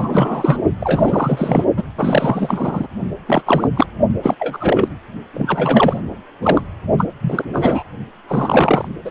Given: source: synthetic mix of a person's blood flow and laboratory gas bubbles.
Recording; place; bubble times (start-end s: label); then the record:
Doppler ultrasound of blood flow; precordium
0.00-0.62 s: bubbles
0.80-1.65 s: bubbles
1.76-1.84 s: bubbles
1.97-2.87 s: bubbles
3.26-3.42 s: bubbles
3.45-3.69 s: bubbles
3.75-3.87 s: bubbles
4.19-4.35 s: bubbles
4.38-4.88 s: bubbles
5.33-6.00 s: bubbles
6.42-6.62 s: bubbles
6.97-7.06 s: bubbles
7.21-7.44 s: bubbles
7.52-7.83 s: bubbles
8.28-8.88 s: bubbles
9.04-9.11 s: bubbles
From the record:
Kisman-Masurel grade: 343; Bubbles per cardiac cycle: rolling drumbeat, 9 or more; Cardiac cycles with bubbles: 100%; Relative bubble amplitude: loud (0.450 to 0.775); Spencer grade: 3 (all of the cardiac periods contain showers or single bubble signals, but not dominating or overriding the cardiac motion signals); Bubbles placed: only in the low amplitude regions of the cardiac cycle